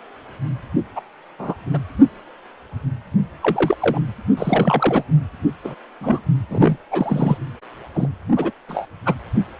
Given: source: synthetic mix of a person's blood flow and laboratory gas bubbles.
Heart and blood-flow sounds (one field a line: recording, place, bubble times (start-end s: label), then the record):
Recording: Doppler ultrasound of blood flow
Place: precordium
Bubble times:
0.96-1.01 s: bubbles
1.39-1.54 s: bubbles
1.73-1.78 s: bubbles
3.42-3.76 s: bubbles
3.80-4.01 s: bubbles
4.37-5.04 s: bubbles
5.64-5.75 s: bubbles
6.00-6.19 s: bubbles
6.50-6.77 s: bubbles
6.91-7.38 s: bubbles
7.94-8.08 s: bubbles
8.36-8.50 s: bubbles
8.68-8.87 s: bubbles
9.05-9.14 s: bubbles
From the record:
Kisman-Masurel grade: 232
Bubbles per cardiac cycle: several, 3 to 8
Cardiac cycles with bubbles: 50 to 99%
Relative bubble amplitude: moderate (0.250 to 0.450)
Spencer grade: 3 (all of the cardiac periods contain showers or single bubble signals, but not dominating or overriding the cardiac motion signals)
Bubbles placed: anywhere in the cardiac cycle